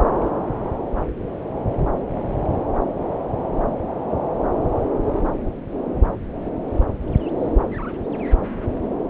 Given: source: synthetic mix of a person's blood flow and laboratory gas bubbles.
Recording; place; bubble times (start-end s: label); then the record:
Doppler ultrasound of blood flow; subclavian vein
no bubbles
From the record:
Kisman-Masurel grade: 000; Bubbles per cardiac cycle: 0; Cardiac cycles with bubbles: 0%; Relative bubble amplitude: no bubbles discernible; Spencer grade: 0 (complete lack of bubble signals)